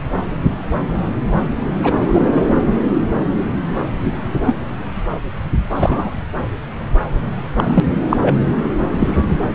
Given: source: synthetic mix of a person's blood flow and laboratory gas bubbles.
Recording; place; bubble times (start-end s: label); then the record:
Doppler ultrasound of blood flow; subclavian vein
1.83-1.92 s: bubbles
2.02-2.42 s: bubbles
4.04-4.12 s: bubbles
4.46-4.57 s: bubbles
5.76-6.10 s: bubbles
7.57-7.80 s: bubbles
8.10-8.17 s: bubbles
8.21-8.36 s: bubbles
9.00-9.22 s: bubbles
From the record:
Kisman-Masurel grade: 123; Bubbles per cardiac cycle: 1 to 2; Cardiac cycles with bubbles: 10 to 50%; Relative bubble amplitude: loud (0.450 to 0.775); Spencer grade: 2 (many but less than half of the cardiac periods contain bubble signals, singularly or in groups); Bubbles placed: anywhere in the cardiac cycle